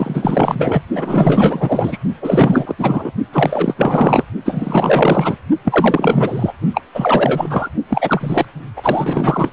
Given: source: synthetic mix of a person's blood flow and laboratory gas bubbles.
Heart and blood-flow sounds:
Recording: Doppler ultrasound of blood flow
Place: precordium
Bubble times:
0.00-0.81 s: bubbles
0.95-1.98 s: bubbles
2.21-2.75 s: bubbles
2.78-3.11 s: bubbles
3.32-3.74 s: bubbles
3.76-4.23 s: bubbles
4.45-5.37 s: bubbles
5.64-6.53 s: bubbles
6.74-6.82 s: bubbles
6.94-7.69 s: bubbles
7.89-8.46 s: bubbles
8.76-9.53 s: bubbles
From the record:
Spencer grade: 4 (maximum detectable bubble signal sounding continuously throughout systole and diastole of every cardiac period, and overriding the amplitude of the normal cardiac signals)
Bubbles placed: only in the low amplitude regions of the cardiac cycle

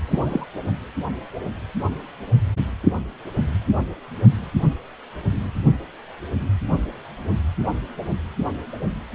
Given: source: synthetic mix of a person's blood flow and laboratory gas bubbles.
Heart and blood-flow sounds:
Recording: Doppler ultrasound of blood flow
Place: precordium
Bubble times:
0.08-0.47 s: bubbles
From the record:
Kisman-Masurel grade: 112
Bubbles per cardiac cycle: 1 to 2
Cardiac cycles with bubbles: 1 to 10%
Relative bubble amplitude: moderate (0.250 to 0.450)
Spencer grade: 1 (occasional bubble signal discernible with the cardiac motion signal, with majority of cardiac periods free of bubbles)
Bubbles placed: only in the low amplitude regions of the cardiac cycle

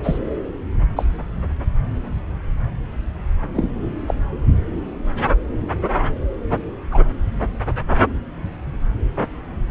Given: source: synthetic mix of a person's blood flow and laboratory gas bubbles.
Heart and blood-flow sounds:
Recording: Doppler ultrasound of blood flow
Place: subclavian vein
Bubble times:
0.03-0.19 s: bubbles
0.96-1.04 s: bubbles
3.53-3.69 s: bubbles
4.07-4.15 s: bubbles
6.91-7.00 s: bubbles
From the record:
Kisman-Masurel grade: 122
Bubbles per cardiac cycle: 1 to 2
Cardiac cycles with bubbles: 10 to 50%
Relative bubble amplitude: moderate (0.250 to 0.450)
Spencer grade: 2 (many but less than half of the cardiac periods contain bubble signals, singularly or in groups)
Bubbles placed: anywhere in the cardiac cycle

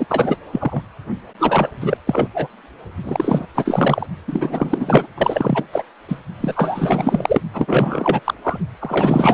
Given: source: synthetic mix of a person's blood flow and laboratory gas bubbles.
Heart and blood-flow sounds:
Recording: Doppler ultrasound of blood flow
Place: precordium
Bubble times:
0.00-0.36 s: bubbles
0.52-0.81 s: bubbles
1.39-1.69 s: bubbles
1.81-1.98 s: bubbles
2.06-2.28 s: bubbles
2.33-2.48 s: bubbles
3.04-3.46 s: bubbles
3.54-4.07 s: bubbles
4.27-5.07 s: bubbles
5.17-5.64 s: bubbles
5.72-5.83 s: bubbles
6.08-6.20 s: bubbles
6.40-7.41 s: bubbles
7.53-8.21 s: bubbles
8.24-8.34 s: bubbles
8.44-8.59 s: bubbles
8.80-9.34 s: bubbles
From the record:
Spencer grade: 4 (maximum detectable bubble signal sounding continuously throughout systole and diastole of every cardiac period, and overriding the amplitude of the normal cardiac signals)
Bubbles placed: only in the low amplitude regions of the cardiac cycle

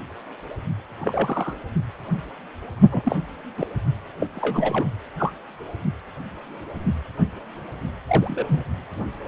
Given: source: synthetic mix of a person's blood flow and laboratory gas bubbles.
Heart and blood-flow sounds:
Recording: Doppler ultrasound of blood flow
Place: precordium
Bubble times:
1.00-1.58 s: bubbles
2.92-3.02 s: bubbles
3.05-3.16 s: bubbles
3.57-3.67 s: bubbles
4.20-4.26 s: bubbles
4.33-4.87 s: bubbles
5.17-5.32 s: bubbles
8.07-8.62 s: bubbles
From the record:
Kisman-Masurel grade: 222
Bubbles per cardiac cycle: several, 3 to 8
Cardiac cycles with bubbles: 10 to 50%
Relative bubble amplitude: moderate (0.250 to 0.450)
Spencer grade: 2 (many but less than half of the cardiac periods contain bubble signals, singularly or in groups)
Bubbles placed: only in the low amplitude regions of the cardiac cycle

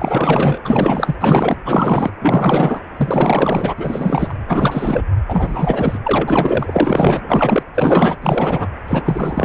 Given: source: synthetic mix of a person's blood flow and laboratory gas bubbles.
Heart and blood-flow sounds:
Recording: Doppler ultrasound of blood flow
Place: precordium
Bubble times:
0.00-1.15 s: bubbles
1.19-1.56 s: bubbles
1.65-2.10 s: bubbles
2.21-2.79 s: bubbles
2.97-3.74 s: bubbles
3.76-4.37 s: bubbles
4.48-5.05 s: bubbles
5.29-5.99 s: bubbles
6.05-7.20 s: bubbles
7.29-7.63 s: bubbles
7.75-8.16 s: bubbles
8.21-8.68 s: bubbles
8.88-9.45 s: bubbles
From the record:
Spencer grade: 4 (maximum detectable bubble signal sounding continuously throughout systole and diastole of every cardiac period, and overriding the amplitude of the normal cardiac signals)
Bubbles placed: anywhere in the cardiac cycle

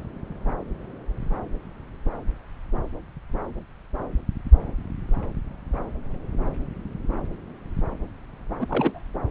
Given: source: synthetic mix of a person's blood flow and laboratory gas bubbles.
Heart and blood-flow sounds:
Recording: Doppler ultrasound of blood flow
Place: subclavian vein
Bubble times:
8.60-8.66 s: bubbles
8.69-9.04 s: bubbles
From the record:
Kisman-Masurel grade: 222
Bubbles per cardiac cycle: several, 3 to 8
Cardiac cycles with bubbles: 10 to 50%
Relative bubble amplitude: moderate (0.250 to 0.450)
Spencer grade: 2 (many but less than half of the cardiac periods contain bubble signals, singularly or in groups)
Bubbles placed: anywhere in the cardiac cycle

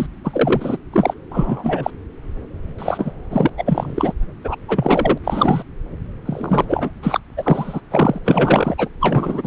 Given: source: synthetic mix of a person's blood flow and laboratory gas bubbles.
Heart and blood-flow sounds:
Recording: Doppler ultrasound of blood flow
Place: subclavian vein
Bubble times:
0.00-0.06 s: bubbles
0.24-0.77 s: bubbles
0.92-1.14 s: bubbles
1.32-1.91 s: bubbles
2.78-3.12 s: bubbles
3.31-3.50 s: bubbles
3.57-4.13 s: bubbles
4.44-4.56 s: bubbles
4.68-5.18 s: bubbles
5.24-5.63 s: bubbles
6.25-6.65 s: bubbles
6.68-6.91 s: bubbles
7.02-7.20 s: bubbles
7.32-7.34 s: bubbles
7.37-7.80 s: bubbles
7.91-8.19 s: bubbles
8.24-8.75 s: bubbles
8.78-8.88 s: bubbles
9.00-9.47 s: bubbles
From the record:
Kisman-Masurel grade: 343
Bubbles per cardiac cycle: rolling drumbeat, 9 or more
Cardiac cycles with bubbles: 100%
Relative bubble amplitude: loud (0.450 to 0.775)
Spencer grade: 3 (all of the cardiac periods contain showers or single bubble signals, but not dominating or overriding the cardiac motion signals)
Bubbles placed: anywhere in the cardiac cycle

